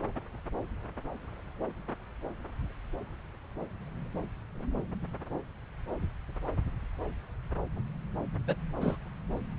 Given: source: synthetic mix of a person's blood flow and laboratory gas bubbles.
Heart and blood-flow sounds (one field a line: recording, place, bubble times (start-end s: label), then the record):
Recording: Doppler ultrasound of blood flow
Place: subclavian vein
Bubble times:
8.47-8.55 s: bubbles
8.80-8.96 s: bubbles
From the record:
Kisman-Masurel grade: 121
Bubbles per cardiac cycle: 1 to 2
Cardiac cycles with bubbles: 10 to 50%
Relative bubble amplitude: barely perceptible (0.100 to 0.250)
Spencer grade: 2 (many but less than half of the cardiac periods contain bubble signals, singularly or in groups)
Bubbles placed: anywhere in the cardiac cycle